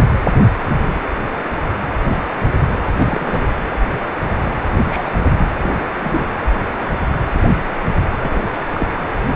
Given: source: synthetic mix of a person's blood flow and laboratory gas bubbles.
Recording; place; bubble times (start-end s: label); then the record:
Doppler ultrasound of blood flow; precordium
2.94-3.47 s: bubbles
4.87-5.11 s: bubbles
5.36-5.49 s: bubbles
5.61-5.94 s: bubbles
6.04-6.25 s: bubbles
8.21-8.43 s: bubbles
8.74-8.88 s: bubbles
From the record:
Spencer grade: 2 (many but less than half of the cardiac periods contain bubble signals, singularly or in groups); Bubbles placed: anywhere in the cardiac cycle